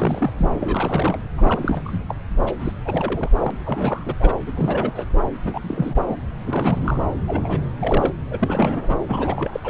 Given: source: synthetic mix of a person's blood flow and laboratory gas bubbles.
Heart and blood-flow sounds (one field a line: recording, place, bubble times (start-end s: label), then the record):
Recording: Doppler ultrasound of blood flow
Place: subclavian vein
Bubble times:
0.00-0.33 s: bubbles
0.39-0.50 s: bubbles
0.53-1.21 s: bubbles
1.38-1.81 s: bubbles
1.83-2.04 s: bubbles
2.08-2.15 s: bubbles
2.46-2.52 s: bubbles
2.59-2.72 s: bubbles
2.83-3.29 s: bubbles
3.39-3.51 s: bubbles
3.65-4.15 s: bubbles
4.20-4.33 s: bubbles
4.46-4.52 s: bubbles
4.55-5.06 s: bubbles
5.44-5.96 s: bubbles
6.01-6.17 s: bubbles
6.46-7.02 s: bubbles
7.27-7.59 s: bubbles
7.80-8.13 s: bubbles
8.31-8.99 s: bubbles
9.08-9.60 s: bubbles
9.64-9.69 s: bubbles
From the record:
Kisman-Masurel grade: 342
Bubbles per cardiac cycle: rolling drumbeat, 9 or more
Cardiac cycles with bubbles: 100%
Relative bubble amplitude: moderate (0.250 to 0.450)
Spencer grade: 3 (all of the cardiac periods contain showers or single bubble signals, but not dominating or overriding the cardiac motion signals)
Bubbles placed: anywhere in the cardiac cycle